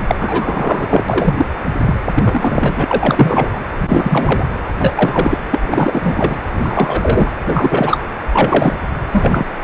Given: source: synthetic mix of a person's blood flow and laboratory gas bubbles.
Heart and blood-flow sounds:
Doppler ultrasound of blood flow; precordium
0.00-0.02 s: bubbles
0.07-0.16 s: bubbles
0.19-1.04 s: bubbles
1.08-1.46 s: bubbles
1.84-1.95 s: bubbles
2.15-2.85 s: bubbles
2.88-3.51 s: bubbles
3.54-3.60 s: bubbles
3.77-4.44 s: bubbles
4.79-5.38 s: bubbles
5.50-6.39 s: bubbles
6.60-7.33 s: bubbles
7.43-7.99 s: bubbles
8.32-8.74 s: bubbles
9.12-9.45 s: bubbles
9.61-9.64 s: bubbles
From the record:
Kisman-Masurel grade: 343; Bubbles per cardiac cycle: rolling drumbeat, 9 or more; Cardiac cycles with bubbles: 100%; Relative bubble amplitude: loud (0.450 to 0.775); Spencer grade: 3 (all of the cardiac periods contain showers or single bubble signals, but not dominating or overriding the cardiac motion signals); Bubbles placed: anywhere in the cardiac cycle

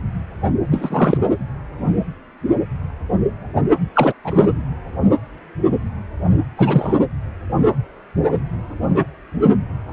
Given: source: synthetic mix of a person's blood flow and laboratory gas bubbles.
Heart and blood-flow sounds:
Doppler ultrasound of blood flow; precordium
0.71-1.18 s: bubbles
3.94-4.13 s: bubbles
4.24-4.47 s: bubbles
6.57-7.00 s: bubbles
From the record:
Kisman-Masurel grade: 223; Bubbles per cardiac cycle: several, 3 to 8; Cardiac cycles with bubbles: 10 to 50%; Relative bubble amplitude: loud (0.450 to 0.775); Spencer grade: 2 (many but less than half of the cardiac periods contain bubble signals, singularly or in groups); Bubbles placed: anywhere in the cardiac cycle

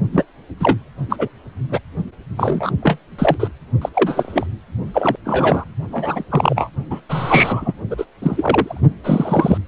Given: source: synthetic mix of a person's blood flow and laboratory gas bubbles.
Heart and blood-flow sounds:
Doppler ultrasound of blood flow; precordium
0.12-0.24 s: bubbles
0.60-0.78 s: bubbles
1.09-1.16 s: bubbles
1.19-1.28 s: bubbles
1.69-1.78 s: bubbles
2.37-2.71 s: bubbles
2.83-2.98 s: bubbles
3.18-3.37 s: bubbles
3.40-3.48 s: bubbles
3.82-3.89 s: bubbles
3.94-4.46 s: bubbles
4.94-5.16 s: bubbles
5.25-5.64 s: bubbles
5.92-6.24 s: bubbles
6.29-6.71 s: bubbles
6.91-7.00 s: bubbles
7.09-7.73 s: bubbles
7.90-8.04 s: bubbles
8.22-8.80 s: bubbles
9.04-9.57 s: bubbles
From the record:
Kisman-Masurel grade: 243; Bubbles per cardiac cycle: several, 3 to 8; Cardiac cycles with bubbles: 100%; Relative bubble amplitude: loud (0.450 to 0.775); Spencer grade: 3 (all of the cardiac periods contain showers or single bubble signals, but not dominating or overriding the cardiac motion signals); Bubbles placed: only in the low amplitude regions of the cardiac cycle

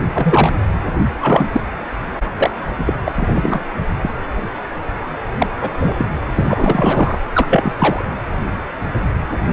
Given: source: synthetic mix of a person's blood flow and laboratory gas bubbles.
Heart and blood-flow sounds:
Doppler ultrasound of blood flow; precordium
0.13-0.53 s: bubbles
1.19-1.46 s: bubbles
1.52-1.60 s: bubbles
2.38-2.50 s: bubbles
2.77-2.94 s: bubbles
3.05-3.12 s: bubbles
3.16-3.64 s: bubbles
4.02-4.09 s: bubbles
5.38-5.47 s: bubbles
5.61-5.70 s: bubbles
5.78-6.07 s: bubbles
6.35-7.19 s: bubbles
7.33-7.72 s: bubbles
7.78-8.04 s: bubbles
From the record:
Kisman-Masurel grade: 233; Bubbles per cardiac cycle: several, 3 to 8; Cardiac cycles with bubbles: 50 to 99%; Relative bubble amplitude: loud (0.450 to 0.775); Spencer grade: 3 (all of the cardiac periods contain showers or single bubble signals, but not dominating or overriding the cardiac motion signals); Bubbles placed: anywhere in the cardiac cycle

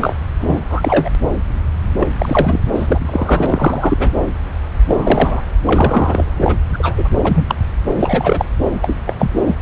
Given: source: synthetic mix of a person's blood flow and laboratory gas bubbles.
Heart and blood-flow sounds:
Doppler ultrasound of blood flow; subclavian vein
0.00-0.18 s: bubbles
0.40-0.58 s: bubbles
0.70-1.10 s: bubbles
2.00-2.08 s: bubbles
2.18-2.60 s: bubbles
2.74-4.09 s: bubbles
4.88-5.42 s: bubbles
5.65-6.30 s: bubbles
6.39-6.56 s: bubbles
6.73-7.08 s: bubbles
7.23-7.55 s: bubbles
7.96-8.45 s: bubbles
8.82-8.96 s: bubbles
9.06-9.31 s: bubbles
9.45-9.55 s: bubbles
From the record:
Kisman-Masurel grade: 233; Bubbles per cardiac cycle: several, 3 to 8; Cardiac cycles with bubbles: 50 to 99%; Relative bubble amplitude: loud (0.450 to 0.775); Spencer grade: 3 (all of the cardiac periods contain showers or single bubble signals, but not dominating or overriding the cardiac motion signals); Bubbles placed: anywhere in the cardiac cycle

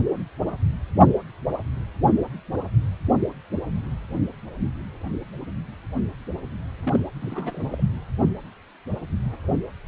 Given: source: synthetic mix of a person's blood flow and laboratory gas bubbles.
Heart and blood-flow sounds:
Doppler ultrasound of blood flow; precordium
6.81-7.04 s: bubbles
7.20-7.84 s: bubbles
From the record:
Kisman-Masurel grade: 211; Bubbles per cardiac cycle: several, 3 to 8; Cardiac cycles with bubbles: 1 to 10%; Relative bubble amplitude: barely perceptible (0.100 to 0.250); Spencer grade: 1 (occasional bubble signal discernible with the cardiac motion signal, with majority of cardiac periods free of bubbles); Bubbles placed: anywhere in the cardiac cycle

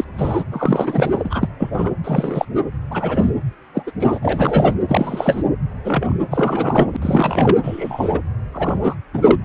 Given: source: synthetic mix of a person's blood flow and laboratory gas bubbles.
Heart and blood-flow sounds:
Doppler ultrasound of blood flow; precordium
0.00-0.04 s: bubbles
0.17-0.43 s: bubbles
0.52-1.48 s: bubbles
1.59-1.70 s: bubbles
1.74-1.91 s: bubbles
2.04-2.46 s: bubbles
2.91-3.31 s: bubbles
3.74-3.84 s: bubbles
3.86-3.92 s: bubbles
3.99-4.19 s: bubbles
4.22-4.75 s: bubbles
4.88-5.42 s: bubbles
5.84-6.18 s: bubbles
6.30-6.96 s: bubbles
7.01-7.57 s: bubbles
7.62-8.21 s: bubbles
8.53-8.95 s: bubbles
9.13-9.36 s: bubbles
From the record:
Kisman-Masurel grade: 243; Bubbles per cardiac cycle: several, 3 to 8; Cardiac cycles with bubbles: 100%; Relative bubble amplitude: loud (0.450 to 0.775); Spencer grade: 3 (all of the cardiac periods contain showers or single bubble signals, but not dominating or overriding the cardiac motion signals); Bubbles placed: anywhere in the cardiac cycle

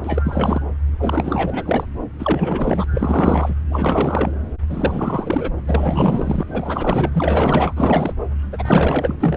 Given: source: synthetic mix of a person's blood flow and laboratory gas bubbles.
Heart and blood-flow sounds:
Doppler ultrasound of blood flow; subclavian vein
0.04-0.61 s: bubbles
0.99-1.86 s: bubbles
2.19-2.84 s: bubbles
2.94-3.54 s: bubbles
3.69-4.34 s: bubbles
4.69-5.51 s: bubbles
5.67-6.43 s: bubbles
6.48-7.73 s: bubbles
7.76-8.14 s: bubbles
8.53-9.37 s: bubbles
From the record:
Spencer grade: 4 (maximum detectable bubble signal sounding continuously throughout systole and diastole of every cardiac period, and overriding the amplitude of the normal cardiac signals); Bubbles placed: anywhere in the cardiac cycle

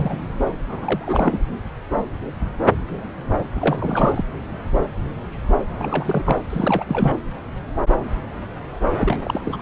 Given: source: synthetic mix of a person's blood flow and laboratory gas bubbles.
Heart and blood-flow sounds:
Doppler ultrasound of blood flow; subclavian vein
0.00-0.19 s: bubbles
0.45-0.54 s: bubbles
0.69-1.39 s: bubbles
3.55-4.23 s: bubbles
5.79-6.40 s: bubbles
6.50-6.84 s: bubbles
6.88-7.17 s: bubbles
8.96-9.19 s: bubbles
9.24-9.41 s: bubbles
9.44-9.62 s: bubbles
From the record:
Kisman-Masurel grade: 332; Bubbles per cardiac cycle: rolling drumbeat, 9 or more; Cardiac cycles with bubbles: 50 to 99%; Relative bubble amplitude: moderate (0.250 to 0.450); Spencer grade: 3 (all of the cardiac periods contain showers or single bubble signals, but not dominating or overriding the cardiac motion signals); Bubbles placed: anywhere in the cardiac cycle

